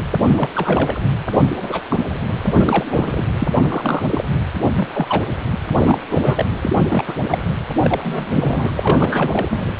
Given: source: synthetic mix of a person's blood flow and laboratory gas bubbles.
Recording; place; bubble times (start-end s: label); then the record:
Doppler ultrasound of blood flow; precordium
0.35-0.49 s: bubbles
0.53-1.00 s: bubbles
1.35-1.41 s: bubbles
1.56-1.81 s: bubbles
1.89-1.99 s: bubbles
2.45-2.84 s: bubbles
2.90-3.26 s: bubbles
3.40-3.48 s: bubbles
3.60-4.03 s: bubbles
4.07-4.23 s: bubbles
4.75-4.88 s: bubbles
4.94-5.25 s: bubbles
5.68-5.98 s: bubbles
6.10-6.46 s: bubbles
6.61-6.76 s: bubbles
6.79-7.04 s: bubbles
7.07-7.14 s: bubbles
7.29-7.42 s: bubbles
7.82-8.74 s: bubbles
8.77-9.65 s: bubbles
9.77-9.80 s: bubbles
From the record:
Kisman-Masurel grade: 232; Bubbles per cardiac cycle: several, 3 to 8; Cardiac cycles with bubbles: 50 to 99%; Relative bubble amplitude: moderate (0.250 to 0.450); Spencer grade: 3 (all of the cardiac periods contain showers or single bubble signals, but not dominating or overriding the cardiac motion signals); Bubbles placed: anywhere in the cardiac cycle